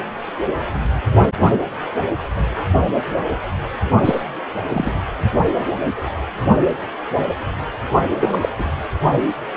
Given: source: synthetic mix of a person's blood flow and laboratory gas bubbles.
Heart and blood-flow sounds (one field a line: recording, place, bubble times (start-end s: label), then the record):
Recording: Doppler ultrasound of blood flow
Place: precordium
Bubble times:
4.04-4.23 s: bubbles
4.72-4.92 s: bubbles
8.19-8.29 s: bubbles
8.32-8.38 s: bubbles
8.41-8.49 s: bubbles
8.58-8.71 s: bubbles
From the record:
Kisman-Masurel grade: 222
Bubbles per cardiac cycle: several, 3 to 8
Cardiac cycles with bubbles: 10 to 50%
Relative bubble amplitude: moderate (0.250 to 0.450)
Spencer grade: 2 (many but less than half of the cardiac periods contain bubble signals, singularly or in groups)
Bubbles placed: only in the low amplitude regions of the cardiac cycle